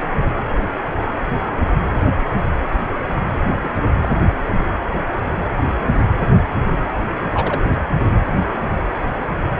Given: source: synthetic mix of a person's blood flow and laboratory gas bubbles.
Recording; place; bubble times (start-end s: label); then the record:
Doppler ultrasound of blood flow; precordium
3.62-3.69 s: bubbles
4.02-4.08 s: bubbles
7.32-7.62 s: bubbles
From the record:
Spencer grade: 2 (many but less than half of the cardiac periods contain bubble signals, singularly or in groups); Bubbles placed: anywhere in the cardiac cycle